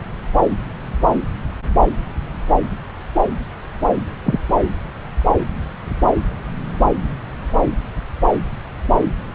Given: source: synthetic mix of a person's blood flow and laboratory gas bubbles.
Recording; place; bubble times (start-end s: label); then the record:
Doppler ultrasound of blood flow; subclavian vein
4.25-4.40 s: bubbles
From the record:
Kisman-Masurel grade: 113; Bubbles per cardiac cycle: 1 to 2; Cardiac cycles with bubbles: 1 to 10%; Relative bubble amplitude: loud (0.450 to 0.775); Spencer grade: 1 (occasional bubble signal discernible with the cardiac motion signal, with majority of cardiac periods free of bubbles); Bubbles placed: anywhere in the cardiac cycle